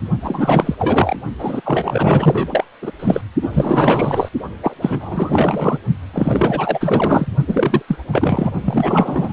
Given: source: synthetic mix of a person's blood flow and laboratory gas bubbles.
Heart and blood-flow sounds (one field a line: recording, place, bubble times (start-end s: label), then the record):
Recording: Doppler ultrasound of blood flow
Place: precordium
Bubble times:
0.22-0.75 s: bubbles
0.78-1.17 s: bubbles
1.38-1.61 s: bubbles
1.64-2.64 s: bubbles
2.81-2.92 s: bubbles
2.99-3.21 s: bubbles
3.42-3.50 s: bubbles
3.52-4.29 s: bubbles
4.62-4.76 s: bubbles
4.81-5.78 s: bubbles
6.12-7.26 s: bubbles
7.47-7.82 s: bubbles
7.87-7.96 s: bubbles
8.12-8.51 s: bubbles
8.61-9.32 s: bubbles
From the record:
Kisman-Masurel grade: 444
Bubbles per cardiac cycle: continuous sound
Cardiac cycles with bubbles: 100%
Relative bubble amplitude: maximal (0.775 to 0.999)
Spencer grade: 4 (maximum detectable bubble signal sounding continuously throughout systole and diastole of every cardiac period, and overriding the amplitude of the normal cardiac signals)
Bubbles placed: only in the low amplitude regions of the cardiac cycle